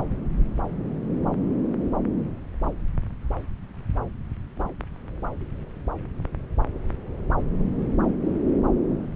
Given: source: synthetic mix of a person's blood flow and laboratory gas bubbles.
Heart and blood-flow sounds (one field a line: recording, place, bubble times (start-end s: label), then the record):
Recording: Doppler ultrasound of blood flow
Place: subclavian vein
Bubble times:
2.63-2.71 s: bubbles
4.58-4.64 s: bubbles
From the record:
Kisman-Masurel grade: 121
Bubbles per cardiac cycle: 1 to 2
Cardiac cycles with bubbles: 10 to 50%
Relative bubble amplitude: barely perceptible (0.100 to 0.250)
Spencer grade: 2 (many but less than half of the cardiac periods contain bubble signals, singularly or in groups)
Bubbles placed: anywhere in the cardiac cycle